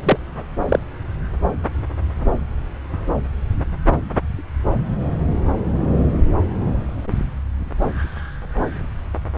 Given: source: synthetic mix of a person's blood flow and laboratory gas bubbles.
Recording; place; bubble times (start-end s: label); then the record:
Doppler ultrasound of blood flow; subclavian vein
0.03-0.17 s: bubbles
0.69-0.79 s: bubbles
From the record:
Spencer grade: 1 (occasional bubble signal discernible with the cardiac motion signal, with majority of cardiac periods free of bubbles); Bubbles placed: anywhere in the cardiac cycle